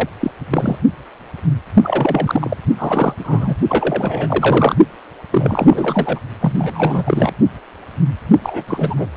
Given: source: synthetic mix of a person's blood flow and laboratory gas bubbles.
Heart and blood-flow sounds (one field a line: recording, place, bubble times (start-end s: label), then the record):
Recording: Doppler ultrasound of blood flow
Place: precordium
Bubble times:
0.00-0.09 s: bubbles
0.21-0.31 s: bubbles
0.51-0.78 s: bubbles
1.83-2.57 s: bubbles
2.78-3.14 s: bubbles
3.18-3.56 s: bubbles
3.68-4.77 s: bubbles
5.31-6.20 s: bubbles
6.40-7.32 s: bubbles
8.42-8.63 s: bubbles
8.67-9.08 s: bubbles
From the record:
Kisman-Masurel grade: 333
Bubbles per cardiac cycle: rolling drumbeat, 9 or more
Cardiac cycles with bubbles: 50 to 99%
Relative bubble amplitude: loud (0.450 to 0.775)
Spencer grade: 3 (all of the cardiac periods contain showers or single bubble signals, but not dominating or overriding the cardiac motion signals)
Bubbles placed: only in the low amplitude regions of the cardiac cycle